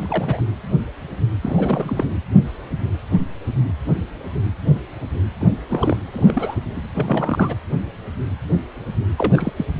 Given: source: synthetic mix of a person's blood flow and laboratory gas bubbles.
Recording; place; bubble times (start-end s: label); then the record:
Doppler ultrasound of blood flow; precordium
0.00-0.41 s: bubbles
1.41-2.06 s: bubbles
5.41-5.54 s: bubbles
5.69-5.97 s: bubbles
6.12-6.55 s: bubbles
6.76-6.81 s: bubbles
6.94-7.55 s: bubbles
9.16-9.53 s: bubbles
9.57-9.65 s: bubbles
From the record:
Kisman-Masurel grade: 232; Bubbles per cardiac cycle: several, 3 to 8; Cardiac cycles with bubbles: 50 to 99%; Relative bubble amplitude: moderate (0.250 to 0.450); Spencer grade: 3 (all of the cardiac periods contain showers or single bubble signals, but not dominating or overriding the cardiac motion signals); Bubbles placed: anywhere in the cardiac cycle